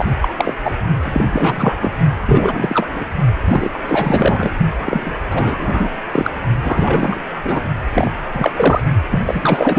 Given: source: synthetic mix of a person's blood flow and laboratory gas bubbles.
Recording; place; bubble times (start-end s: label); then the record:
Doppler ultrasound of blood flow; precordium
0.00-0.05 s: bubbles
0.20-0.29 s: bubbles
0.38-0.55 s: bubbles
0.64-0.75 s: bubbles
1.02-1.25 s: bubbles
1.32-1.76 s: bubbles
1.80-1.93 s: bubbles
2.26-2.89 s: bubbles
2.96-3.06 s: bubbles
3.46-3.70 s: bubbles
3.73-3.79 s: bubbles
3.85-4.51 s: bubbles
4.82-5.12 s: bubbles
5.30-5.91 s: bubbles
6.12-6.32 s: bubbles
6.63-7.20 s: bubbles
7.35-7.41 s: bubbles
7.43-7.62 s: bubbles
7.93-8.11 s: bubbles
8.32-8.52 s: bubbles
8.56-8.81 s: bubbles
9.10-9.19 s: bubbles
9.26-9.79 s: bubbles
From the record:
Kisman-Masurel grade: 343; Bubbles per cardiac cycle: rolling drumbeat, 9 or more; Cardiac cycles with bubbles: 100%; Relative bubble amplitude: loud (0.450 to 0.775); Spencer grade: 3 (all of the cardiac periods contain showers or single bubble signals, but not dominating or overriding the cardiac motion signals); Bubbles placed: only in the low amplitude regions of the cardiac cycle